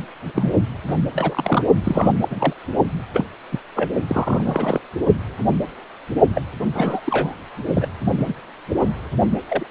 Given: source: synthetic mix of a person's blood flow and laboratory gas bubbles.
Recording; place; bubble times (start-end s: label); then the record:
Doppler ultrasound of blood flow; precordium
0.00-0.06 s: bubbles
0.34-0.52 s: bubbles
0.88-0.95 s: bubbles
1.14-1.64 s: bubbles
1.83-2.12 s: bubbles
2.21-2.54 s: bubbles
3.13-3.25 s: bubbles
3.52-3.59 s: bubbles
3.75-3.91 s: bubbles
4.08-4.80 s: bubbles
6.34-6.42 s: bubbles
6.75-7.00 s: bubbles
7.05-7.34 s: bubbles
7.75-7.88 s: bubbles
8.18-8.34 s: bubbles
8.81-9.01 s: bubbles
9.48-9.67 s: bubbles
From the record:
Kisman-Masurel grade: 232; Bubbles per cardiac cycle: several, 3 to 8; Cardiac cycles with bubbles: 50 to 99%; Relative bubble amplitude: moderate (0.250 to 0.450); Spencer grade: 3 (all of the cardiac periods contain showers or single bubble signals, but not dominating or overriding the cardiac motion signals); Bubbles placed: only in the low amplitude regions of the cardiac cycle